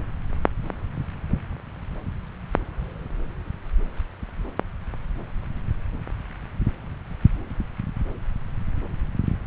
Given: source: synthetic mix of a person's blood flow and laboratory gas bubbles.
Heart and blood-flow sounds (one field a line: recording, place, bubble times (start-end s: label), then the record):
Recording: Doppler ultrasound of blood flow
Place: subclavian vein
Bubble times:
no bubbles
From the record:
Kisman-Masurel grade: 000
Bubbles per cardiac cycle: 0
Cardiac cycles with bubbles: 0%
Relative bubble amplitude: no bubbles discernible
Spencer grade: 0 (complete lack of bubble signals)